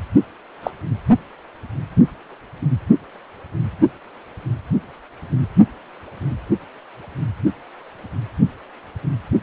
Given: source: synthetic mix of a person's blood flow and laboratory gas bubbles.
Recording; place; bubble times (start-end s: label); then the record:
Doppler ultrasound of blood flow; precordium
0.63-0.71 s: bubbles
From the record:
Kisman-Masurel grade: 112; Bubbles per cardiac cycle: 1 to 2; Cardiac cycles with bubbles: 1 to 10%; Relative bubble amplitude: moderate (0.250 to 0.450); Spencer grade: 1 (occasional bubble signal discernible with the cardiac motion signal, with majority of cardiac periods free of bubbles); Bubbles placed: anywhere in the cardiac cycle